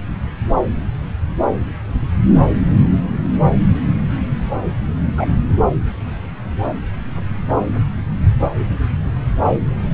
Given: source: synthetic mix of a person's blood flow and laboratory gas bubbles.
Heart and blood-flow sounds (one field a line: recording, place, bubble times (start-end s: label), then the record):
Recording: Doppler ultrasound of blood flow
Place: subclavian vein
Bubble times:
5.17-5.27 s: bubbles
From the record:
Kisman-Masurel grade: 113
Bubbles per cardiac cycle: 1 to 2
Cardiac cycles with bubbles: 1 to 10%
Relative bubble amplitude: loud (0.450 to 0.775)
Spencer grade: 1 (occasional bubble signal discernible with the cardiac motion signal, with majority of cardiac periods free of bubbles)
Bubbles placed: anywhere in the cardiac cycle